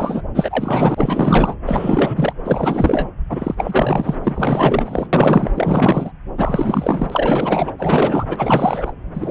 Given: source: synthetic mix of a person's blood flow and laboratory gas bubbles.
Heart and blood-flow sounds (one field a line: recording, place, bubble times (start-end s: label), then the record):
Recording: Doppler ultrasound of blood flow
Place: subclavian vein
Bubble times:
0.00-0.21 s: bubbles
0.34-1.55 s: bubbles
1.66-2.33 s: bubbles
2.45-3.08 s: bubbles
3.29-4.15 s: bubbles
4.23-5.07 s: bubbles
5.12-5.50 s: bubbles
5.54-6.12 s: bubbles
6.38-7.71 s: bubbles
7.78-8.92 s: bubbles
9.14-9.31 s: bubbles
From the record:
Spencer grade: 4 (maximum detectable bubble signal sounding continuously throughout systole and diastole of every cardiac period, and overriding the amplitude of the normal cardiac signals)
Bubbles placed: anywhere in the cardiac cycle